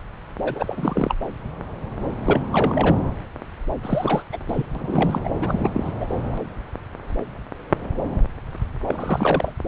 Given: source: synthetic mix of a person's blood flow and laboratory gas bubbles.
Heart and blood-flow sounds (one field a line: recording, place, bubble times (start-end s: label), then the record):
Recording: Doppler ultrasound of blood flow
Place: subclavian vein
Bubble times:
0.43-1.15 s: bubbles
2.26-2.41 s: bubbles
2.52-2.97 s: bubbles
3.81-4.23 s: bubbles
4.32-4.38 s: bubbles
4.48-4.66 s: bubbles
4.75-5.20 s: bubbles
5.24-5.31 s: bubbles
5.41-5.70 s: bubbles
5.74-5.92 s: bubbles
6.00-6.05 s: bubbles
8.85-9.53 s: bubbles
From the record:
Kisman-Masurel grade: 332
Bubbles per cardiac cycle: rolling drumbeat, 9 or more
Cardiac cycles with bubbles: 50 to 99%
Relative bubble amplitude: moderate (0.250 to 0.450)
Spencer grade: 3 (all of the cardiac periods contain showers or single bubble signals, but not dominating or overriding the cardiac motion signals)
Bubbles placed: anywhere in the cardiac cycle